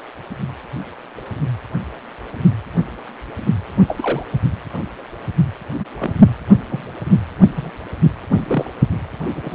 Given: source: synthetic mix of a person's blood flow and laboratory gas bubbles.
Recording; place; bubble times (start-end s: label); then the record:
Doppler ultrasound of blood flow; precordium
3.87-4.24 s: bubbles
5.79-5.85 s: bubbles
6.00-6.14 s: bubbles
6.69-6.87 s: bubbles
7.56-7.71 s: bubbles
8.32-8.71 s: bubbles
9.35-9.55 s: bubbles
From the record:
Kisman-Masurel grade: 122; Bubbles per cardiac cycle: 1 to 2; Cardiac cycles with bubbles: 10 to 50%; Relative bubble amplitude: moderate (0.250 to 0.450); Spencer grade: 2 (many but less than half of the cardiac periods contain bubble signals, singularly or in groups); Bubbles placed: anywhere in the cardiac cycle